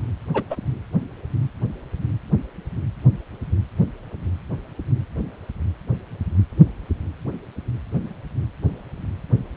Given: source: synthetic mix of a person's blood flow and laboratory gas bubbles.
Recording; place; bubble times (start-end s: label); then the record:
Doppler ultrasound of blood flow; precordium
0.34-0.43 s: bubbles
0.50-0.56 s: bubbles
From the record:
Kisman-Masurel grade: 113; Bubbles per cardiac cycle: 1 to 2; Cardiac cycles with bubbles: 1 to 10%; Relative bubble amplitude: loud (0.450 to 0.775); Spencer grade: 1 (occasional bubble signal discernible with the cardiac motion signal, with majority of cardiac periods free of bubbles); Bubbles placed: anywhere in the cardiac cycle